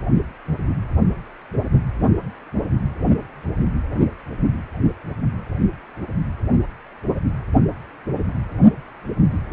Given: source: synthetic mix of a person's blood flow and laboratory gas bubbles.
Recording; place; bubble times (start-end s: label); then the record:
Doppler ultrasound of blood flow; precordium
no bubbles
From the record:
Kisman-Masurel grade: 000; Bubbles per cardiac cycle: 0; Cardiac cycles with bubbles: 0%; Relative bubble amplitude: no bubbles discernible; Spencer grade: 0 (complete lack of bubble signals)